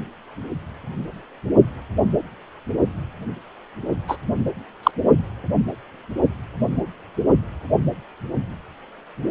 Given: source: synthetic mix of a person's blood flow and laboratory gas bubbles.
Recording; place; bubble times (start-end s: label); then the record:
Doppler ultrasound of blood flow; precordium
4.07-4.17 s: bubbles
4.83-4.91 s: bubbles
From the record:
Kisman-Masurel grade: 113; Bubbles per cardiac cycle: 1 to 2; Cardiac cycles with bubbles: 1 to 10%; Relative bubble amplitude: loud (0.450 to 0.775); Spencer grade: 1 (occasional bubble signal discernible with the cardiac motion signal, with majority of cardiac periods free of bubbles); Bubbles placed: only in the low amplitude regions of the cardiac cycle